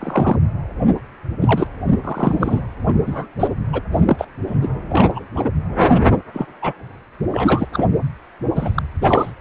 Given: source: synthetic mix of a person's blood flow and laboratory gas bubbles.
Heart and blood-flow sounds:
Doppler ultrasound of blood flow; precordium
0.00-0.39 s: bubbles
1.41-1.67 s: bubbles
2.03-2.62 s: bubbles
2.88-2.98 s: bubbles
3.02-3.27 s: bubbles
3.40-3.48 s: bubbles
3.72-3.81 s: bubbles
3.92-4.26 s: bubbles
4.47-4.69 s: bubbles
4.89-5.23 s: bubbles
5.35-5.50 s: bubbles
6.33-6.46 s: bubbles
6.62-6.73 s: bubbles
7.31-7.67 s: bubbles
7.73-7.98 s: bubbles
8.55-8.71 s: bubbles
8.74-8.82 s: bubbles
9.01-9.31 s: bubbles
From the record:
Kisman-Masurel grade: 243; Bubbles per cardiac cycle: several, 3 to 8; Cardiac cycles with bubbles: 100%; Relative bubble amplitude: loud (0.450 to 0.775); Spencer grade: 3 (all of the cardiac periods contain showers or single bubble signals, but not dominating or overriding the cardiac motion signals); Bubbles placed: anywhere in the cardiac cycle

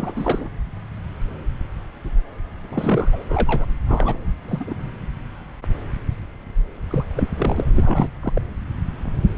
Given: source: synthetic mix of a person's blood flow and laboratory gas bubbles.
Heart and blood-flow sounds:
Doppler ultrasound of blood flow; subclavian vein
0.00-0.49 s: bubbles
2.70-3.10 s: bubbles
3.12-3.24 s: bubbles
3.29-3.66 s: bubbles
3.87-4.24 s: bubbles
4.48-4.75 s: bubbles
4.78-4.88 s: bubbles
6.91-7.05 s: bubbles
7.16-7.27 s: bubbles
7.37-7.64 s: bubbles
7.75-8.08 s: bubbles
8.23-8.42 s: bubbles
From the record:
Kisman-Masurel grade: 332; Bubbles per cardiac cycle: rolling drumbeat, 9 or more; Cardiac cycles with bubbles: 50 to 99%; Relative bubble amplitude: moderate (0.250 to 0.450); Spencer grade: 3 (all of the cardiac periods contain showers or single bubble signals, but not dominating or overriding the cardiac motion signals); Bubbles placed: anywhere in the cardiac cycle

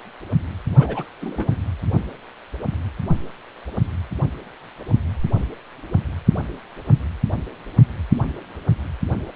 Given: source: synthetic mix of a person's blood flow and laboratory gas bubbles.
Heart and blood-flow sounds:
Doppler ultrasound of blood flow; precordium
0.78-1.03 s: bubbles
1.21-1.55 s: bubbles
From the record:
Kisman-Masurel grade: 211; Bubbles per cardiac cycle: several, 3 to 8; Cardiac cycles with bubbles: 1 to 10%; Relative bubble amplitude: barely perceptible (0.100 to 0.250); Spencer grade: 1 (occasional bubble signal discernible with the cardiac motion signal, with majority of cardiac periods free of bubbles); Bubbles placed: anywhere in the cardiac cycle

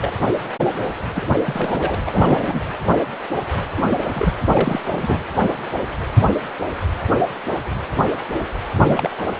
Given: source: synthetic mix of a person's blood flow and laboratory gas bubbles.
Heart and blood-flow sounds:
Doppler ultrasound of blood flow; precordium
0.00-0.12 s: bubbles
1.12-1.27 s: bubbles
1.46-1.95 s: bubbles
2.06-2.64 s: bubbles
3.77-3.82 s: bubbles
3.90-3.98 s: bubbles
4.04-4.11 s: bubbles
4.16-4.33 s: bubbles
4.52-4.81 s: bubbles
4.90-5.18 s: bubbles
8.75-9.10 s: bubbles
9.18-9.22 s: bubbles
9.27-9.33 s: bubbles
From the record:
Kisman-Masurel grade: 232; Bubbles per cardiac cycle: several, 3 to 8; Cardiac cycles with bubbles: 50 to 99%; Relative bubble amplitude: moderate (0.250 to 0.450); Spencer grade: 3 (all of the cardiac periods contain showers or single bubble signals, but not dominating or overriding the cardiac motion signals); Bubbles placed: anywhere in the cardiac cycle

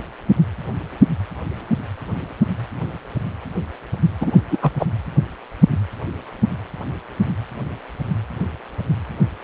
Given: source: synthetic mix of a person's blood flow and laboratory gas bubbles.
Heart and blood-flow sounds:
Doppler ultrasound of blood flow; precordium
4.21-4.41 s: bubbles
4.51-4.58 s: bubbles
4.62-4.71 s: bubbles
4.79-4.86 s: bubbles
From the record:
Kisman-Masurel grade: 223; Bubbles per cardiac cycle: several, 3 to 8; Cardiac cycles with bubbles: 10 to 50%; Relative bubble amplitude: loud (0.450 to 0.775); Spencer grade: 2 (many but less than half of the cardiac periods contain bubble signals, singularly or in groups); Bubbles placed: anywhere in the cardiac cycle

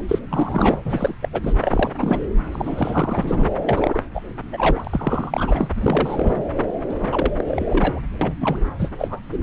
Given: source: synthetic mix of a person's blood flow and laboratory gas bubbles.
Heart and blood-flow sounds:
Doppler ultrasound of blood flow; subclavian vein
0.08-0.19 s: bubbles
0.30-0.81 s: bubbles
0.84-1.15 s: bubbles
1.22-1.28 s: bubbles
1.33-1.41 s: bubbles
1.43-1.53 s: bubbles
1.61-1.91 s: bubbles
1.98-2.21 s: bubbles
2.51-3.50 s: bubbles
3.64-4.00 s: bubbles
4.13-4.21 s: bubbles
4.52-5.67 s: bubbles
5.75-6.50 s: bubbles
6.89-7.32 s: bubbles
7.37-7.44 s: bubbles
7.47-8.02 s: bubbles
8.21-8.35 s: bubbles
8.40-8.59 s: bubbles
8.79-8.90 s: bubbles
8.98-9.20 s: bubbles
9.32-9.37 s: bubbles
From the record:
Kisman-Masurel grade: 342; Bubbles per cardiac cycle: rolling drumbeat, 9 or more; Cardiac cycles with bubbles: 100%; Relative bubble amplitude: moderate (0.250 to 0.450); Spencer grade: 3 (all of the cardiac periods contain showers or single bubble signals, but not dominating or overriding the cardiac motion signals); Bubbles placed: anywhere in the cardiac cycle

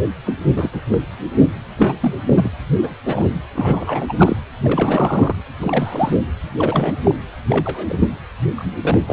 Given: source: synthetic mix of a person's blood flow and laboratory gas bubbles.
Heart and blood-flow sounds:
Doppler ultrasound of blood flow; precordium
0.26-0.35 s: bubbles
0.56-0.81 s: bubbles
0.90-0.98 s: bubbles
1.77-1.95 s: bubbles
2.02-2.14 s: bubbles
2.25-2.54 s: bubbles
2.82-2.94 s: bubbles
3.06-3.27 s: bubbles
3.54-4.37 s: bubbles
4.63-5.35 s: bubbles
5.59-6.16 s: bubbles
6.59-6.96 s: bubbles
7.04-7.15 s: bubbles
7.50-7.86 s: bubbles
7.89-8.07 s: bubbles
8.55-8.76 s: bubbles
8.83-8.99 s: bubbles
9.07-9.13 s: bubbles
From the record:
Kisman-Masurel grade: 232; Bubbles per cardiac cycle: several, 3 to 8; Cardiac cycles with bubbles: 50 to 99%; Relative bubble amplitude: moderate (0.250 to 0.450); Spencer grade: 3 (all of the cardiac periods contain showers or single bubble signals, but not dominating or overriding the cardiac motion signals); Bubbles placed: anywhere in the cardiac cycle

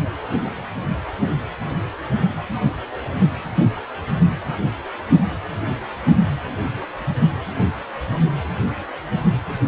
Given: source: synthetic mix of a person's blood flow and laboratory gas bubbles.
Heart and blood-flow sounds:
Doppler ultrasound of blood flow; precordium
no bubbles
From the record:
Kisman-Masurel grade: 000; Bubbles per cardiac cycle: 0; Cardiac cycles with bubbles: 0%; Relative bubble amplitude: no bubbles discernible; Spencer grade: 0 (complete lack of bubble signals)

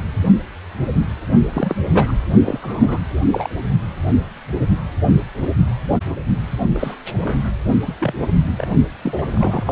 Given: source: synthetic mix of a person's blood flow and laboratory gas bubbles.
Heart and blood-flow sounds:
Doppler ultrasound of blood flow; precordium
1.53-1.76 s: bubbles
1.90-2.13 s: bubbles
2.45-3.00 s: bubbles
3.33-3.50 s: bubbles
6.74-6.94 s: bubbles
7.13-7.46 s: bubbles
7.86-7.97 s: bubbles
8.00-8.13 s: bubbles
8.21-8.28 s: bubbles
8.57-8.67 s: bubbles
9.03-9.72 s: bubbles
From the record:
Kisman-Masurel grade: 232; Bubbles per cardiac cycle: several, 3 to 8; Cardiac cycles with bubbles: 50 to 99%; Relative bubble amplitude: moderate (0.250 to 0.450); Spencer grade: 3 (all of the cardiac periods contain showers or single bubble signals, but not dominating or overriding the cardiac motion signals); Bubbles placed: only in the low amplitude regions of the cardiac cycle

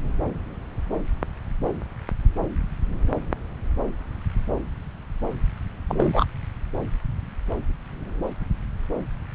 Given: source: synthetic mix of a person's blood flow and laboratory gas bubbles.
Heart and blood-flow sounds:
Doppler ultrasound of blood flow; subclavian vein
5.88-6.25 s: bubbles
From the record:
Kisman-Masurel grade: 112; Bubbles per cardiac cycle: 1 to 2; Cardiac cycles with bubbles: 1 to 10%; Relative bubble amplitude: moderate (0.250 to 0.450); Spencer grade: 1 (occasional bubble signal discernible with the cardiac motion signal, with majority of cardiac periods free of bubbles); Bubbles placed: anywhere in the cardiac cycle

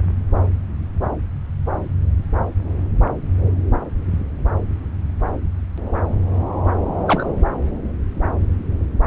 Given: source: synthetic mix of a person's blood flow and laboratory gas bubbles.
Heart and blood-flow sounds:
Doppler ultrasound of blood flow; subclavian vein
7.06-7.30 s: bubbles
From the record:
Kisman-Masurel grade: 113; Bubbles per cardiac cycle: 1 to 2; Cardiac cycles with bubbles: 1 to 10%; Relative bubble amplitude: loud (0.450 to 0.775); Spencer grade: 1 (occasional bubble signal discernible with the cardiac motion signal, with majority of cardiac periods free of bubbles); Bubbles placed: anywhere in the cardiac cycle

